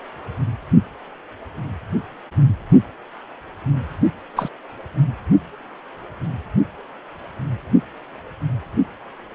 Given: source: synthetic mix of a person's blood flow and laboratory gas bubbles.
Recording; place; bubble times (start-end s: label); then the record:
Doppler ultrasound of blood flow; precordium
4.36-4.49 s: bubbles
From the record:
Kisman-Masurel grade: 123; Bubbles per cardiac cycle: 1 to 2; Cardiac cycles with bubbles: 10 to 50%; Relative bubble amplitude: loud (0.450 to 0.775); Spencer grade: 2 (many but less than half of the cardiac periods contain bubble signals, singularly or in groups); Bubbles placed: only in the low amplitude regions of the cardiac cycle